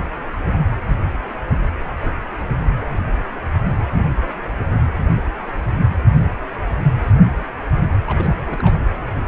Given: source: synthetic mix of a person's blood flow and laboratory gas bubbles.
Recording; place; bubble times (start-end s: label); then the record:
Doppler ultrasound of blood flow; precordium
8.06-8.40 s: bubbles
8.44-8.75 s: bubbles
From the record:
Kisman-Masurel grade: 211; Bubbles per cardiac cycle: several, 3 to 8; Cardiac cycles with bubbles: 1 to 10%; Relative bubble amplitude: barely perceptible (0.100 to 0.250); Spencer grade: 1 (occasional bubble signal discernible with the cardiac motion signal, with majority of cardiac periods free of bubbles); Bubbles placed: anywhere in the cardiac cycle